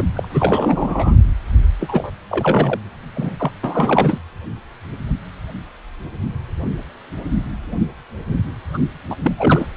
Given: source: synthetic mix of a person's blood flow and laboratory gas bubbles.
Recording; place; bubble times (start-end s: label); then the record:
Doppler ultrasound of blood flow; precordium
0.00-0.04 s: bubbles
0.15-1.16 s: bubbles
1.80-2.11 s: bubbles
2.29-2.80 s: bubbles
3.15-3.37 s: bubbles
3.39-3.51 s: bubbles
3.64-4.18 s: bubbles
8.73-8.78 s: bubbles
9.09-9.15 s: bubbles
9.23-9.32 s: bubbles
9.38-9.67 s: bubbles
From the record:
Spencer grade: 3 (all of the cardiac periods contain showers or single bubble signals, but not dominating or overriding the cardiac motion signals); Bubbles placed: anywhere in the cardiac cycle